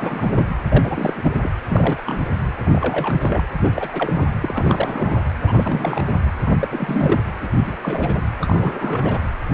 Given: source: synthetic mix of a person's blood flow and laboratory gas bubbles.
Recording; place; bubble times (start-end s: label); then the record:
Doppler ultrasound of blood flow; precordium
0.00-0.46 s: bubbles
0.70-1.32 s: bubbles
1.43-1.50 s: bubbles
1.69-2.02 s: bubbles
2.06-2.28 s: bubbles
2.58-3.44 s: bubbles
3.62-3.70 s: bubbles
3.76-4.27 s: bubbles
4.41-5.19 s: bubbles
5.41-6.12 s: bubbles
6.46-6.50 s: bubbles
6.60-7.21 s: bubbles
7.41-7.48 s: bubbles
7.67-7.77 s: bubbles
7.83-8.22 s: bubbles
8.41-9.19 s: bubbles
From the record:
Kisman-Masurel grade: 342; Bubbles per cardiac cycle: rolling drumbeat, 9 or more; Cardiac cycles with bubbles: 100%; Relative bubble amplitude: moderate (0.250 to 0.450); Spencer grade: 3 (all of the cardiac periods contain showers or single bubble signals, but not dominating or overriding the cardiac motion signals); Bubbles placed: anywhere in the cardiac cycle